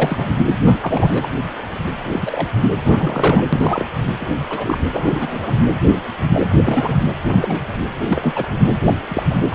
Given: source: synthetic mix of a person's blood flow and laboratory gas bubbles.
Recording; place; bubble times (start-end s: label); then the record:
Doppler ultrasound of blood flow; precordium
0.00-0.29 s: bubbles
0.36-0.41 s: bubbles
0.65-0.78 s: bubbles
0.82-1.27 s: bubbles
2.08-2.48 s: bubbles
2.71-2.76 s: bubbles
2.84-3.43 s: bubbles
3.52-3.85 s: bubbles
4.19-4.35 s: bubbles
4.50-4.80 s: bubbles
4.93-5.53 s: bubbles
5.93-5.97 s: bubbles
6.33-6.48 s: bubbles
6.65-6.96 s: bubbles
7.25-7.73 s: bubbles
8.08-8.45 s: bubbles
8.84-8.94 s: bubbles
9.08-9.23 s: bubbles
9.30-9.35 s: bubbles
9.50-9.55 s: bubbles
From the record:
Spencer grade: 3 (all of the cardiac periods contain showers or single bubble signals, but not dominating or overriding the cardiac motion signals); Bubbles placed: anywhere in the cardiac cycle